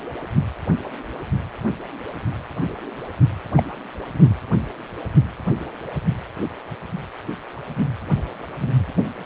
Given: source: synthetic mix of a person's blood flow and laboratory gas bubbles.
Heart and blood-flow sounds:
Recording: Doppler ultrasound of blood flow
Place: precordium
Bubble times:
3.56-3.63 s: bubbles
4.24-4.29 s: bubbles
From the record:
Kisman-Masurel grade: 112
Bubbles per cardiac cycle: 1 to 2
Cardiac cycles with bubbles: 1 to 10%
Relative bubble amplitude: moderate (0.250 to 0.450)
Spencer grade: 1 (occasional bubble signal discernible with the cardiac motion signal, with majority of cardiac periods free of bubbles)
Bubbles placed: anywhere in the cardiac cycle

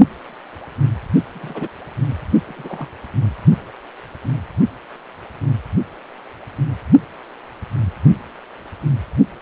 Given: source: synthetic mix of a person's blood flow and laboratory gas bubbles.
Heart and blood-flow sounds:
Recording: Doppler ultrasound of blood flow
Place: precordium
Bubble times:
1.34-1.67 s: bubbles
2.48-2.88 s: bubbles
From the record:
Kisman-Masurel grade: 121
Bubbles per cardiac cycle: 1 to 2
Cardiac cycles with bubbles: 10 to 50%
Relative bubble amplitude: barely perceptible (0.100 to 0.250)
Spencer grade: 2 (many but less than half of the cardiac periods contain bubble signals, singularly or in groups)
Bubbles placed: only in the low amplitude regions of the cardiac cycle

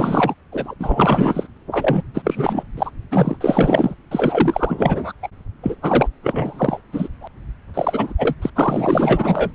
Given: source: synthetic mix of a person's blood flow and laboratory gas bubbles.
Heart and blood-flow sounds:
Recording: Doppler ultrasound of blood flow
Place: subclavian vein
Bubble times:
0.00-0.35 s: bubbles
0.52-0.75 s: bubbles
0.79-1.48 s: bubbles
1.71-2.04 s: bubbles
2.14-2.64 s: bubbles
2.77-2.91 s: bubbles
3.11-3.37 s: bubbles
3.41-3.95 s: bubbles
4.11-5.12 s: bubbles
5.22-5.29 s: bubbles
5.63-5.75 s: bubbles
5.82-6.08 s: bubbles
6.23-6.80 s: bubbles
6.92-7.08 s: bubbles
7.21-7.28 s: bubbles
7.73-8.13 s: bubbles
8.18-8.36 s: bubbles
8.42-8.50 s: bubbles
8.55-9.55 s: bubbles
From the record:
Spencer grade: 4 (maximum detectable bubble signal sounding continuously throughout systole and diastole of every cardiac period, and overriding the amplitude of the normal cardiac signals)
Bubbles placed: anywhere in the cardiac cycle

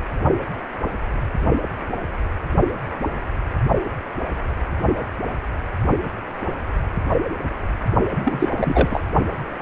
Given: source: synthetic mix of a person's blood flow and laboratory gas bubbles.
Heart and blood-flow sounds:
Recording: Doppler ultrasound of blood flow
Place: precordium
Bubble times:
8.17-8.49 s: bubbles
8.55-9.01 s: bubbles
From the record:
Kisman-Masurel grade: 212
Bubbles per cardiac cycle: several, 3 to 8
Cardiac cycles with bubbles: 1 to 10%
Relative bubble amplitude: moderate (0.250 to 0.450)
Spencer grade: 1 (occasional bubble signal discernible with the cardiac motion signal, with majority of cardiac periods free of bubbles)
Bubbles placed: only in the low amplitude regions of the cardiac cycle

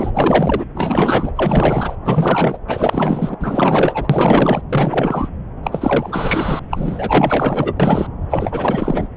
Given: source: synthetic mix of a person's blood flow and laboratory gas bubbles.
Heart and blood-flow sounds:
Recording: Doppler ultrasound of blood flow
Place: subclavian vein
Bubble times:
0.00-0.11 s: bubbles
0.14-0.65 s: bubbles
0.74-1.32 s: bubbles
1.35-1.96 s: bubbles
2.04-2.58 s: bubbles
2.67-3.36 s: bubbles
3.40-4.62 s: bubbles
4.69-5.29 s: bubbles
5.63-6.60 s: bubbles
6.71-7.73 s: bubbles
7.79-8.07 s: bubbles
8.30-9.08 s: bubbles
From the record:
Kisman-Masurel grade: 444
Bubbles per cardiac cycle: continuous sound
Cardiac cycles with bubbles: 100%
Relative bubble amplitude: maximal (0.775 to 0.999)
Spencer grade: 4 (maximum detectable bubble signal sounding continuously throughout systole and diastole of every cardiac period, and overriding the amplitude of the normal cardiac signals)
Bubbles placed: anywhere in the cardiac cycle

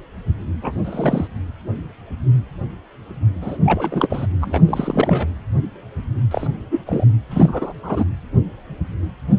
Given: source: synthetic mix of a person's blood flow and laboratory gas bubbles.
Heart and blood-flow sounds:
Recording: Doppler ultrasound of blood flow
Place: precordium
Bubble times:
0.61-0.75 s: bubbles
0.84-1.27 s: bubbles
3.41-3.58 s: bubbles
3.65-4.27 s: bubbles
4.41-4.62 s: bubbles
4.66-5.28 s: bubbles
6.30-6.48 s: bubbles
6.71-6.82 s: bubbles
6.86-7.05 s: bubbles
7.30-7.73 s: bubbles
7.83-8.04 s: bubbles
From the record:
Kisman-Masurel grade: 232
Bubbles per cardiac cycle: several, 3 to 8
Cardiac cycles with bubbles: 50 to 99%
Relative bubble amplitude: moderate (0.250 to 0.450)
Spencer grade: 3 (all of the cardiac periods contain showers or single bubble signals, but not dominating or overriding the cardiac motion signals)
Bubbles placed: anywhere in the cardiac cycle

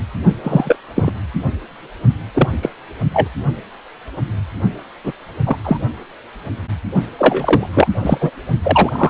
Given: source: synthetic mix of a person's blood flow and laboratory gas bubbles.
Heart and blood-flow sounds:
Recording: Doppler ultrasound of blood flow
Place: precordium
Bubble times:
0.43-0.77 s: bubbles
0.95-1.11 s: bubbles
2.34-2.48 s: bubbles
2.62-2.70 s: bubbles
3.13-3.28 s: bubbles
5.04-5.12 s: bubbles
5.46-5.56 s: bubbles
5.64-5.78 s: bubbles
7.18-7.67 s: bubbles
7.74-7.88 s: bubbles
8.01-8.18 s: bubbles
8.21-8.30 s: bubbles
8.62-9.10 s: bubbles
From the record:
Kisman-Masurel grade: 233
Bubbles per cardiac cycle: several, 3 to 8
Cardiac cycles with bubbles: 50 to 99%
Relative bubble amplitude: loud (0.450 to 0.775)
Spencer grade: 3 (all of the cardiac periods contain showers or single bubble signals, but not dominating or overriding the cardiac motion signals)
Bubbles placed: only in the low amplitude regions of the cardiac cycle

